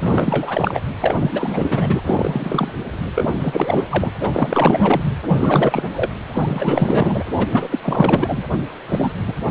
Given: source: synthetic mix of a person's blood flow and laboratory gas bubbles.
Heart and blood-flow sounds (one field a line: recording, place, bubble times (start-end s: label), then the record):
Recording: Doppler ultrasound of blood flow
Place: precordium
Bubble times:
0.00-0.80 s: bubbles
1.00-1.16 s: bubbles
1.20-2.02 s: bubbles
2.06-2.73 s: bubbles
3.15-3.29 s: bubbles
3.38-3.84 s: bubbles
3.89-4.10 s: bubbles
4.20-5.02 s: bubbles
5.28-5.84 s: bubbles
5.96-6.10 s: bubbles
6.32-7.24 s: bubbles
7.37-7.79 s: bubbles
7.82-8.45 s: bubbles
8.88-9.12 s: bubbles
9.28-9.34 s: bubbles
From the record:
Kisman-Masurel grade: 444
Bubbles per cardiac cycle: continuous sound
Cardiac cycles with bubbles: 100%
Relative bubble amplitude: maximal (0.775 to 0.999)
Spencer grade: 4 (maximum detectable bubble signal sounding continuously throughout systole and diastole of every cardiac period, and overriding the amplitude of the normal cardiac signals)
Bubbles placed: anywhere in the cardiac cycle